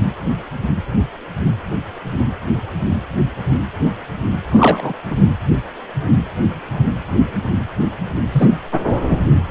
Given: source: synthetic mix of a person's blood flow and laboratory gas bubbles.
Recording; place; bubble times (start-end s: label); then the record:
Doppler ultrasound of blood flow; precordium
4.50-4.93 s: bubbles
5.10-5.16 s: bubbles
8.32-8.52 s: bubbles
From the record:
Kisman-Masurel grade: 223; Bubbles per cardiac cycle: several, 3 to 8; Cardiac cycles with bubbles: 10 to 50%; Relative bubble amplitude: loud (0.450 to 0.775); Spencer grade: 2 (many but less than half of the cardiac periods contain bubble signals, singularly or in groups); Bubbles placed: anywhere in the cardiac cycle